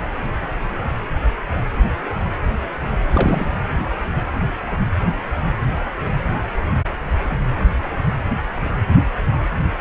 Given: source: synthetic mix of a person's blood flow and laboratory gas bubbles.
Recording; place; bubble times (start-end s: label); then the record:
Doppler ultrasound of blood flow; precordium
3.10-3.50 s: bubbles
From the record:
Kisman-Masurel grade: 213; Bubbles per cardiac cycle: several, 3 to 8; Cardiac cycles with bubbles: 1 to 10%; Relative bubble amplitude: loud (0.450 to 0.775); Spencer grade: 1 (occasional bubble signal discernible with the cardiac motion signal, with majority of cardiac periods free of bubbles); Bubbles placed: anywhere in the cardiac cycle